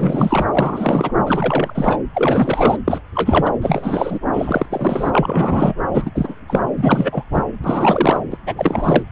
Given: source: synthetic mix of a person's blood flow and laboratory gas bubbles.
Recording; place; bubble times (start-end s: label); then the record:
Doppler ultrasound of blood flow; subclavian vein
0.00-0.46 s: bubbles
0.51-1.11 s: bubbles
1.27-1.99 s: bubbles
2.14-2.77 s: bubbles
2.88-3.01 s: bubbles
3.15-3.50 s: bubbles
3.62-4.18 s: bubbles
4.33-4.66 s: bubbles
4.69-5.74 s: bubbles
5.93-6.10 s: bubbles
6.14-6.34 s: bubbles
6.48-6.61 s: bubbles
6.77-7.24 s: bubbles
7.31-7.43 s: bubbles
7.64-8.20 s: bubbles
8.31-8.38 s: bubbles
8.46-8.54 s: bubbles
8.57-9.03 s: bubbles
From the record:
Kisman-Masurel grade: 343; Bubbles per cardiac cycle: rolling drumbeat, 9 or more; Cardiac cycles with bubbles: 100%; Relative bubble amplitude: loud (0.450 to 0.775); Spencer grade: 3 (all of the cardiac periods contain showers or single bubble signals, but not dominating or overriding the cardiac motion signals); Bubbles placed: anywhere in the cardiac cycle